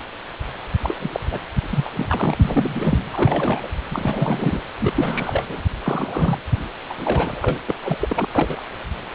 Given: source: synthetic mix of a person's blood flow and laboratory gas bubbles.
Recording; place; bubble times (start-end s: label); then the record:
Doppler ultrasound of blood flow; precordium
0.82-1.10 s: bubbles
1.13-1.20 s: bubbles
1.31-1.39 s: bubbles
1.65-1.90 s: bubbles
1.96-2.98 s: bubbles
3.12-3.68 s: bubbles
3.91-4.61 s: bubbles
4.81-4.93 s: bubbles
4.96-5.46 s: bubbles
5.49-5.62 s: bubbles
5.83-6.38 s: bubbles
6.89-6.94 s: bubbles
7.06-7.58 s: bubbles
7.67-7.75 s: bubbles
7.83-8.26 s: bubbles
8.34-8.61 s: bubbles
From the record:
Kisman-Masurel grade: 242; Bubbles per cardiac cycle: several, 3 to 8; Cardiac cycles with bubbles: 100%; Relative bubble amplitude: moderate (0.250 to 0.450); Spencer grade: 3 (all of the cardiac periods contain showers or single bubble signals, but not dominating or overriding the cardiac motion signals); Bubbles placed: anywhere in the cardiac cycle